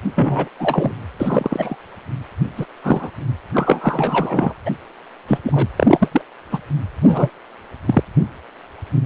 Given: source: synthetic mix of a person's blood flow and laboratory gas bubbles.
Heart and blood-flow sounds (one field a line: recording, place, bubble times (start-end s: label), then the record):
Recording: Doppler ultrasound of blood flow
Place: precordium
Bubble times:
0.15-0.48 s: bubbles
0.58-0.92 s: bubbles
1.20-1.76 s: bubbles
2.57-2.66 s: bubbles
2.84-3.10 s: bubbles
3.54-4.54 s: bubbles
4.65-4.71 s: bubbles
5.28-5.38 s: bubbles
5.44-5.67 s: bubbles
5.76-6.21 s: bubbles
6.50-6.59 s: bubbles
7.01-7.30 s: bubbles
7.86-8.03 s: bubbles
From the record:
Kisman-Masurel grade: 233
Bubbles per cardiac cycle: several, 3 to 8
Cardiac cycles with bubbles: 50 to 99%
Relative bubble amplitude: loud (0.450 to 0.775)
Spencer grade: 3 (all of the cardiac periods contain showers or single bubble signals, but not dominating or overriding the cardiac motion signals)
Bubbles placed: anywhere in the cardiac cycle